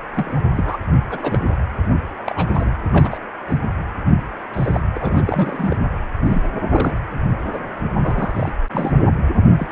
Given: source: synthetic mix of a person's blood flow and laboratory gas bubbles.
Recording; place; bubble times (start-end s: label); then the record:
Doppler ultrasound of blood flow; precordium
0.15-0.41 s: bubbles
0.55-0.76 s: bubbles
1.10-1.58 s: bubbles
2.26-2.71 s: bubbles
2.92-3.18 s: bubbles
3.49-3.58 s: bubbles
4.54-4.81 s: bubbles
4.95-4.98 s: bubbles
5.00-5.90 s: bubbles
6.25-6.49 s: bubbles
6.72-7.00 s: bubbles
7.52-7.58 s: bubbles
8.01-8.51 s: bubbles
8.72-8.93 s: bubbles
9.58-9.72 s: bubbles
From the record:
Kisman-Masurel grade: 242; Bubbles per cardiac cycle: several, 3 to 8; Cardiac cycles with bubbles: 100%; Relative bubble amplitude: moderate (0.250 to 0.450); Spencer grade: 3 (all of the cardiac periods contain showers or single bubble signals, but not dominating or overriding the cardiac motion signals); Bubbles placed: anywhere in the cardiac cycle